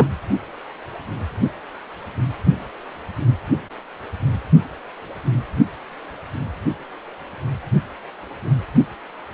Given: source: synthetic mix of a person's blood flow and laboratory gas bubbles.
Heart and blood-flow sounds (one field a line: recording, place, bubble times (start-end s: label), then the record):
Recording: Doppler ultrasound of blood flow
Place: precordium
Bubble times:
0.00-0.06 s: bubbles
From the record:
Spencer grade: 2 (many but less than half of the cardiac periods contain bubble signals, singularly or in groups)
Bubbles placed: only in the low amplitude regions of the cardiac cycle